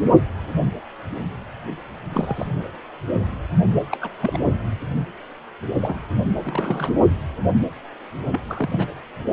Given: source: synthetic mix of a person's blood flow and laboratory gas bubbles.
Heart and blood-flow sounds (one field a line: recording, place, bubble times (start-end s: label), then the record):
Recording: Doppler ultrasound of blood flow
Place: precordium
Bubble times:
2.12-2.47 s: bubbles
3.91-3.97 s: bubbles
4.01-4.10 s: bubbles
4.20-4.39 s: bubbles
5.80-6.00 s: bubbles
6.23-6.32 s: bubbles
6.45-6.93 s: bubbles
8.31-8.40 s: bubbles
8.48-8.88 s: bubbles
From the record:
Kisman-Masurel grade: 222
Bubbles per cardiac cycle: several, 3 to 8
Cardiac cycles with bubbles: 10 to 50%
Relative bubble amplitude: moderate (0.250 to 0.450)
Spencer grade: 2 (many but less than half of the cardiac periods contain bubble signals, singularly or in groups)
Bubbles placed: anywhere in the cardiac cycle